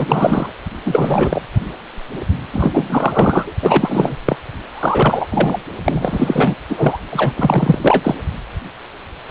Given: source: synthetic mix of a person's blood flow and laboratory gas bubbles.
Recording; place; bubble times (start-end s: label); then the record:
Doppler ultrasound of blood flow; precordium
0.00-0.50 s: bubbles
0.85-1.42 s: bubbles
2.52-3.52 s: bubbles
3.61-4.16 s: bubbles
4.25-4.37 s: bubbles
4.72-5.28 s: bubbles
5.31-5.58 s: bubbles
5.84-6.56 s: bubbles
6.70-6.99 s: bubbles
7.10-7.33 s: bubbles
7.36-7.78 s: bubbles
7.82-8.15 s: bubbles
9.28-9.30 s: bubbles
From the record:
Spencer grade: 3 (all of the cardiac periods contain showers or single bubble signals, but not dominating or overriding the cardiac motion signals); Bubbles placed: anywhere in the cardiac cycle